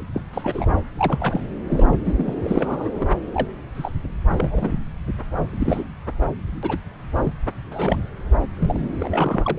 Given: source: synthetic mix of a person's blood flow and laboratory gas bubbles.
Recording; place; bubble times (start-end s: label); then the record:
Doppler ultrasound of blood flow; subclavian vein
0.14-0.23 s: bubbles
0.33-0.76 s: bubbles
0.97-1.41 s: bubbles
1.69-1.97 s: bubbles
2.04-2.33 s: bubbles
2.44-2.90 s: bubbles
2.95-3.07 s: bubbles
3.33-3.48 s: bubbles
3.74-3.91 s: bubbles
4.30-4.79 s: bubbles
5.46-5.87 s: bubbles
6.62-6.78 s: bubbles
7.16-7.33 s: bubbles
7.71-7.98 s: bubbles
8.58-8.88 s: bubbles
8.99-9.59 s: bubbles
From the record:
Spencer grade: 3 (all of the cardiac periods contain showers or single bubble signals, but not dominating or overriding the cardiac motion signals); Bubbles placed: anywhere in the cardiac cycle